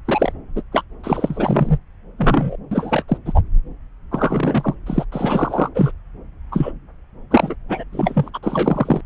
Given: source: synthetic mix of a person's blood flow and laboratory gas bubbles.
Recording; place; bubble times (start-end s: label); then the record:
Doppler ultrasound of blood flow; subclavian vein
0.05-0.32 s: bubbles
0.55-0.63 s: bubbles
0.72-0.83 s: bubbles
1.03-1.78 s: bubbles
2.18-2.56 s: bubbles
2.71-3.04 s: bubbles
3.08-3.17 s: bubbles
3.25-3.42 s: bubbles
4.11-4.75 s: bubbles
4.86-5.05 s: bubbles
5.12-5.69 s: bubbles
5.75-5.92 s: bubbles
6.51-6.72 s: bubbles
7.30-7.55 s: bubbles
7.69-7.84 s: bubbles
7.92-8.29 s: bubbles
8.34-8.38 s: bubbles
8.43-9.01 s: bubbles
From the record:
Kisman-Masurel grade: 333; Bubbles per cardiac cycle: rolling drumbeat, 9 or more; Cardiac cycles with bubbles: 50 to 99%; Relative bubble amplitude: loud (0.450 to 0.775); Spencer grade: 3 (all of the cardiac periods contain showers or single bubble signals, but not dominating or overriding the cardiac motion signals); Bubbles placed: anywhere in the cardiac cycle